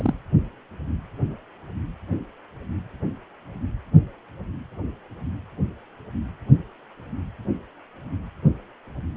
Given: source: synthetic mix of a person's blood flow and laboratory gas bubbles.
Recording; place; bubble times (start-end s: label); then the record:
Doppler ultrasound of blood flow; precordium
0.00-0.14 s: bubbles
From the record:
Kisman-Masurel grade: 212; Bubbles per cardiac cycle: several, 3 to 8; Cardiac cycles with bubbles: 1 to 10%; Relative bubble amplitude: moderate (0.250 to 0.450); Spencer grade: 1 (occasional bubble signal discernible with the cardiac motion signal, with majority of cardiac periods free of bubbles); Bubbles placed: anywhere in the cardiac cycle